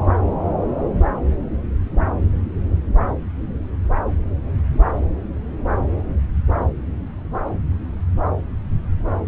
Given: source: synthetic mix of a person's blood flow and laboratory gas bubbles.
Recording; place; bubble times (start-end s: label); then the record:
Doppler ultrasound of blood flow; subclavian vein
no bubbles
From the record:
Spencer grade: 0 (complete lack of bubble signals)